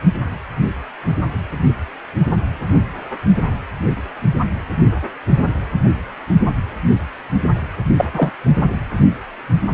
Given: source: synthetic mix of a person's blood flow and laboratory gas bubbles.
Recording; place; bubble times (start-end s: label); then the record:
Doppler ultrasound of blood flow; precordium
7.96-8.10 s: bubbles
8.12-8.31 s: bubbles
From the record:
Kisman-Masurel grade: 113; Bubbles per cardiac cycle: 1 to 2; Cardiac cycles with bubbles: 1 to 10%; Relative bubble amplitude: loud (0.450 to 0.775); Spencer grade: 1 (occasional bubble signal discernible with the cardiac motion signal, with majority of cardiac periods free of bubbles); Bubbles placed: anywhere in the cardiac cycle